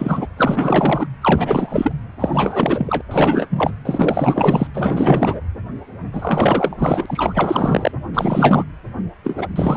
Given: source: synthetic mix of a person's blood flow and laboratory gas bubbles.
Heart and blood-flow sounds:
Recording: Doppler ultrasound of blood flow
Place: precordium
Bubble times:
0.00-0.27 s: bubbles
0.37-1.07 s: bubbles
1.21-1.94 s: bubbles
2.19-3.01 s: bubbles
3.10-3.48 s: bubbles
3.50-3.71 s: bubbles
3.85-4.67 s: bubbles
4.73-5.41 s: bubbles
6.12-7.92 s: bubbles
8.13-8.64 s: bubbles
9.24-9.47 s: bubbles
9.55-9.77 s: bubbles
From the record:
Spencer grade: 4 (maximum detectable bubble signal sounding continuously throughout systole and diastole of every cardiac period, and overriding the amplitude of the normal cardiac signals)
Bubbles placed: anywhere in the cardiac cycle

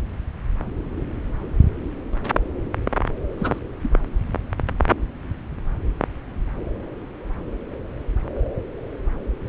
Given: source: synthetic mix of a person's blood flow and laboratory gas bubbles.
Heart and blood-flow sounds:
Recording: Doppler ultrasound of blood flow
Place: subclavian vein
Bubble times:
3.38-3.59 s: bubbles
3.81-3.91 s: bubbles
From the record:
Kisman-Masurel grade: 211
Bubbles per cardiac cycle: several, 3 to 8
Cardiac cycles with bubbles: 1 to 10%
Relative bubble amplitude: barely perceptible (0.100 to 0.250)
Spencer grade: 1 (occasional bubble signal discernible with the cardiac motion signal, with majority of cardiac periods free of bubbles)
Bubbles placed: anywhere in the cardiac cycle

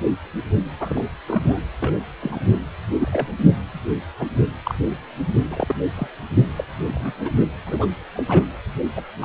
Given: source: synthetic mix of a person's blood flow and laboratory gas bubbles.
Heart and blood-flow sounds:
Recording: Doppler ultrasound of blood flow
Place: precordium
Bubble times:
0.80-1.04 s: bubbles
1.27-1.57 s: bubbles
1.80-1.97 s: bubbles
2.22-2.58 s: bubbles
2.97-3.27 s: bubbles
4.19-4.25 s: bubbles
4.65-4.75 s: bubbles
4.78-4.97 s: bubbles
5.50-5.75 s: bubbles
5.96-6.08 s: bubbles
6.56-6.64 s: bubbles
6.91-7.14 s: bubbles
7.25-7.31 s: bubbles
7.66-7.86 s: bubbles
8.16-8.23 s: bubbles
8.28-8.45 s: bubbles
8.96-9.04 s: bubbles
9.21-9.25 s: bubbles
From the record:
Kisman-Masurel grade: 232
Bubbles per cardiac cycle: several, 3 to 8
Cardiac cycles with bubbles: 50 to 99%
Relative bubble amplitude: moderate (0.250 to 0.450)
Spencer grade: 3 (all of the cardiac periods contain showers or single bubble signals, but not dominating or overriding the cardiac motion signals)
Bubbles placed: anywhere in the cardiac cycle

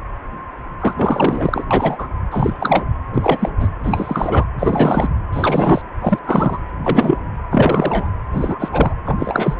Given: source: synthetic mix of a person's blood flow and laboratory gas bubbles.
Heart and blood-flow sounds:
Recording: Doppler ultrasound of blood flow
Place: precordium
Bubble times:
0.80-0.93 s: bubbles
0.96-1.65 s: bubbles
1.71-2.07 s: bubbles
2.31-2.84 s: bubbles
3.14-3.50 s: bubbles
3.60-3.69 s: bubbles
3.83-4.46 s: bubbles
4.58-5.09 s: bubbles
5.33-5.81 s: bubbles
6.01-6.19 s: bubbles
6.24-6.60 s: bubbles
6.79-7.18 s: bubbles
7.50-8.11 s: bubbles
8.32-8.94 s: bubbles
9.05-9.54 s: bubbles
From the record:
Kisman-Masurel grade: 333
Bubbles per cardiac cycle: rolling drumbeat, 9 or more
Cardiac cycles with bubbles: 50 to 99%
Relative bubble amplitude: loud (0.450 to 0.775)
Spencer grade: 3 (all of the cardiac periods contain showers or single bubble signals, but not dominating or overriding the cardiac motion signals)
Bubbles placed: anywhere in the cardiac cycle

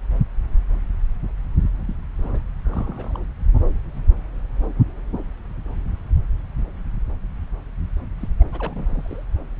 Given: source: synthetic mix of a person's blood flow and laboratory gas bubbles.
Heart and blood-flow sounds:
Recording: Doppler ultrasound of blood flow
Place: subclavian vein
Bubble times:
1.88-1.94 s: bubbles
2.19-2.39 s: bubbles
2.66-3.21 s: bubbles
8.20-8.29 s: bubbles
8.39-8.44 s: bubbles
8.52-9.25 s: bubbles
From the record:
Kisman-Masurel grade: 221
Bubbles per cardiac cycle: several, 3 to 8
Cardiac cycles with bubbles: 10 to 50%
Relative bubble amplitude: barely perceptible (0.100 to 0.250)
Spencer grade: 2 (many but less than half of the cardiac periods contain bubble signals, singularly or in groups)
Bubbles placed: anywhere in the cardiac cycle

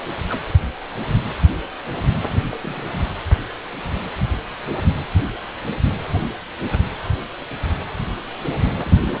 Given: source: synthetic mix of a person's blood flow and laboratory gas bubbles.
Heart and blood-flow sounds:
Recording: Doppler ultrasound of blood flow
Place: precordium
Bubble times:
0.27-0.40 s: bubbles
2.25-2.45 s: bubbles
2.51-2.55 s: bubbles
2.60-2.84 s: bubbles
8.74-9.01 s: bubbles
9.06-9.16 s: bubbles
From the record:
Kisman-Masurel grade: 221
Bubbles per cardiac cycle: several, 3 to 8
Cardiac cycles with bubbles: 10 to 50%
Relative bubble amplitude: barely perceptible (0.100 to 0.250)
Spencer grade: 2 (many but less than half of the cardiac periods contain bubble signals, singularly or in groups)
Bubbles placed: anywhere in the cardiac cycle

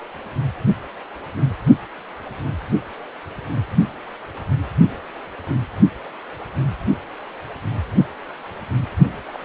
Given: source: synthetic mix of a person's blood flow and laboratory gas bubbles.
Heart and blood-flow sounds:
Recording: Doppler ultrasound of blood flow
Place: precordium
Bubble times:
9.26-9.38 s: bubbles
9.40-9.45 s: bubbles
From the record:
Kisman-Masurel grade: 211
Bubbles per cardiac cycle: several, 3 to 8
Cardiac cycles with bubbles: 1 to 10%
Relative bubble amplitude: barely perceptible (0.100 to 0.250)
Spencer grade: 1 (occasional bubble signal discernible with the cardiac motion signal, with majority of cardiac periods free of bubbles)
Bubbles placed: anywhere in the cardiac cycle

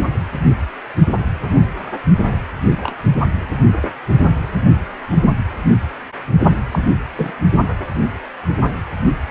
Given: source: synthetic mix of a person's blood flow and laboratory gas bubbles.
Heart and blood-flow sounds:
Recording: Doppler ultrasound of blood flow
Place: precordium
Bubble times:
2.81-2.96 s: bubbles
3.81-3.88 s: bubbles
6.71-6.79 s: bubbles
7.16-7.31 s: bubbles
From the record:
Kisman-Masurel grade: 122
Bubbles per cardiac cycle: 1 to 2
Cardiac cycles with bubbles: 10 to 50%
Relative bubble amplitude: moderate (0.250 to 0.450)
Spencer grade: 2 (many but less than half of the cardiac periods contain bubble signals, singularly or in groups)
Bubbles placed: only in the low amplitude regions of the cardiac cycle

